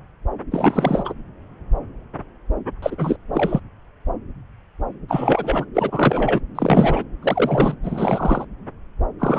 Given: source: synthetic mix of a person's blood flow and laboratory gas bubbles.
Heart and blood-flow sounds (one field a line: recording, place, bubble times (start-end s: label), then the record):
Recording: Doppler ultrasound of blood flow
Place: subclavian vein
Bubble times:
0.51-1.13 s: bubbles
2.82-2.96 s: bubbles
2.98-3.16 s: bubbles
3.33-3.60 s: bubbles
5.08-5.66 s: bubbles
5.75-6.40 s: bubbles
6.55-7.04 s: bubbles
7.22-7.75 s: bubbles
7.83-8.44 s: bubbles
9.19-9.39 s: bubbles
From the record:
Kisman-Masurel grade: 333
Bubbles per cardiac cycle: rolling drumbeat, 9 or more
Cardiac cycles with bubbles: 50 to 99%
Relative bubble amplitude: loud (0.450 to 0.775)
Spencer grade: 3 (all of the cardiac periods contain showers or single bubble signals, but not dominating or overriding the cardiac motion signals)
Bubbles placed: anywhere in the cardiac cycle